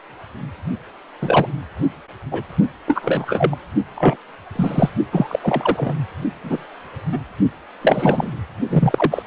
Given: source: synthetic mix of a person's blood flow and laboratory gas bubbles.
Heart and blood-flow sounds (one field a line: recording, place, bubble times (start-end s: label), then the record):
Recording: Doppler ultrasound of blood flow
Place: precordium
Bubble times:
1.21-1.47 s: bubbles
2.31-2.44 s: bubbles
2.86-3.56 s: bubbles
3.95-4.17 s: bubbles
4.56-4.90 s: bubbles
5.12-5.39 s: bubbles
5.43-5.94 s: bubbles
6.44-6.65 s: bubbles
7.12-7.20 s: bubbles
7.81-8.31 s: bubbles
8.70-9.23 s: bubbles
From the record:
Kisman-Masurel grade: 243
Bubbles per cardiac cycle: several, 3 to 8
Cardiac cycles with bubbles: 100%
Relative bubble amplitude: loud (0.450 to 0.775)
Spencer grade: 3 (all of the cardiac periods contain showers or single bubble signals, but not dominating or overriding the cardiac motion signals)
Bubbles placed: only in the low amplitude regions of the cardiac cycle